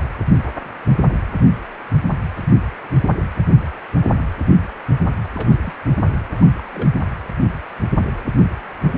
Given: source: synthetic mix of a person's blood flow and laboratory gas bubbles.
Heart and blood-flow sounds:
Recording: Doppler ultrasound of blood flow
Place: precordium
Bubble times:
5.35-5.75 s: bubbles
6.33-6.46 s: bubbles
6.57-6.61 s: bubbles
6.71-6.89 s: bubbles
From the record:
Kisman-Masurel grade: 221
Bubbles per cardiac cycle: several, 3 to 8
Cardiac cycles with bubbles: 10 to 50%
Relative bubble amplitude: barely perceptible (0.100 to 0.250)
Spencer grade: 2 (many but less than half of the cardiac periods contain bubble signals, singularly or in groups)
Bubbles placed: anywhere in the cardiac cycle

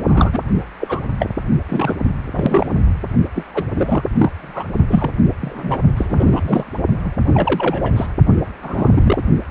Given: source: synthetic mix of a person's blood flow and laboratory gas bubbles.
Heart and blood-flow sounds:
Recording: Doppler ultrasound of blood flow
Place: precordium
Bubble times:
0.08-0.40 s: bubbles
0.80-1.00 s: bubbles
1.19-1.27 s: bubbles
1.69-1.95 s: bubbles
2.24-2.67 s: bubbles
3.35-3.44 s: bubbles
3.54-3.64 s: bubbles
3.75-4.04 s: bubbles
4.17-4.30 s: bubbles
4.38-4.68 s: bubbles
4.88-5.10 s: bubbles
5.41-5.79 s: bubbles
5.96-6.73 s: bubbles
7.04-7.12 s: bubbles
7.22-8.06 s: bubbles
8.62-9.24 s: bubbles
9.46-9.51 s: bubbles
From the record:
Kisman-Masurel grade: 232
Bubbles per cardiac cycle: several, 3 to 8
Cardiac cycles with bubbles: 50 to 99%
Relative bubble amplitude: moderate (0.250 to 0.450)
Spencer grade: 3 (all of the cardiac periods contain showers or single bubble signals, but not dominating or overriding the cardiac motion signals)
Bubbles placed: only in the low amplitude regions of the cardiac cycle

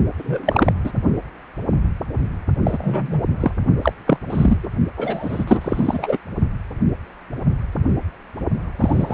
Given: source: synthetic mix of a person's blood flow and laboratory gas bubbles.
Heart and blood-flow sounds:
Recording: Doppler ultrasound of blood flow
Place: precordium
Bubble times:
0.19-0.73 s: bubbles
0.84-0.92 s: bubbles
2.63-3.22 s: bubbles
3.40-3.51 s: bubbles
3.82-3.93 s: bubbles
4.06-4.17 s: bubbles
4.29-4.58 s: bubbles
4.63-4.68 s: bubbles
4.97-6.18 s: bubbles
8.79-9.14 s: bubbles
From the record:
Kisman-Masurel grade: 233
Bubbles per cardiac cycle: several, 3 to 8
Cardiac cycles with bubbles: 50 to 99%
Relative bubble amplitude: loud (0.450 to 0.775)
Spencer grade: 3 (all of the cardiac periods contain showers or single bubble signals, but not dominating or overriding the cardiac motion signals)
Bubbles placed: only in the low amplitude regions of the cardiac cycle

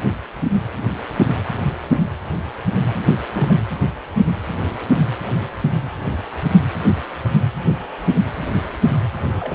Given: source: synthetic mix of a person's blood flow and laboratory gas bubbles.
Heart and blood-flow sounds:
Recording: Doppler ultrasound of blood flow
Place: precordium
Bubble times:
2.93-3.00 s: bubbles
3.08-3.19 s: bubbles
3.33-3.60 s: bubbles
9.39-9.54 s: bubbles
From the record:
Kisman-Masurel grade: 221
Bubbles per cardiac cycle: several, 3 to 8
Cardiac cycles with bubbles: 10 to 50%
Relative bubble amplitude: barely perceptible (0.100 to 0.250)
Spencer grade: 2 (many but less than half of the cardiac periods contain bubble signals, singularly or in groups)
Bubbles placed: anywhere in the cardiac cycle

